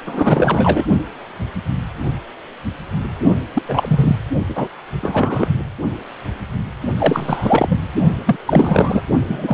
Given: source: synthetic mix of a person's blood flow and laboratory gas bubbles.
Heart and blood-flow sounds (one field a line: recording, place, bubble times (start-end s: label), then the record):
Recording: Doppler ultrasound of blood flow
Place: precordium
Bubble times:
0.05-0.86 s: bubbles
3.54-3.62 s: bubbles
3.68-4.17 s: bubbles
4.47-4.69 s: bubbles
5.01-5.47 s: bubbles
6.98-7.77 s: bubbles
8.26-8.36 s: bubbles
8.46-9.02 s: bubbles
9.28-9.54 s: bubbles
From the record:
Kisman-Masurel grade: 333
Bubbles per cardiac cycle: rolling drumbeat, 9 or more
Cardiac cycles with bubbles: 50 to 99%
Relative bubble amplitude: loud (0.450 to 0.775)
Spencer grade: 3 (all of the cardiac periods contain showers or single bubble signals, but not dominating or overriding the cardiac motion signals)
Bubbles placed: only in the low amplitude regions of the cardiac cycle